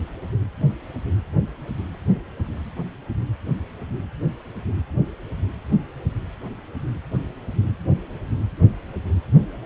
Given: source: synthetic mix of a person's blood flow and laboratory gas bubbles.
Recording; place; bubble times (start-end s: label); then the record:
Doppler ultrasound of blood flow; precordium
no bubbles
From the record:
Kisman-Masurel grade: 000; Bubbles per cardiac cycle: 0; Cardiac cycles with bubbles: 0%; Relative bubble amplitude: no bubbles discernible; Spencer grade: 0 (complete lack of bubble signals)